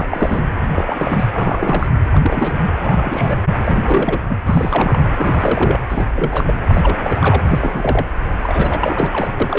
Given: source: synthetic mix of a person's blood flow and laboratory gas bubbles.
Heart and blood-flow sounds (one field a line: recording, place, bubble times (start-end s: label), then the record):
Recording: Doppler ultrasound of blood flow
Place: precordium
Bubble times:
0.00-0.43 s: bubbles
0.75-1.88 s: bubbles
2.12-2.66 s: bubbles
2.81-3.44 s: bubbles
3.59-4.20 s: bubbles
4.29-4.37 s: bubbles
4.46-5.03 s: bubbles
5.17-5.81 s: bubbles
5.89-6.09 s: bubbles
6.14-6.54 s: bubbles
6.68-7.40 s: bubbles
7.49-8.05 s: bubbles
8.43-9.33 s: bubbles
9.40-9.59 s: bubbles
From the record:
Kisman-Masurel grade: 342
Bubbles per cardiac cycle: rolling drumbeat, 9 or more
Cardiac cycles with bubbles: 100%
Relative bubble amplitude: moderate (0.250 to 0.450)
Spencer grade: 3 (all of the cardiac periods contain showers or single bubble signals, but not dominating or overriding the cardiac motion signals)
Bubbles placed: anywhere in the cardiac cycle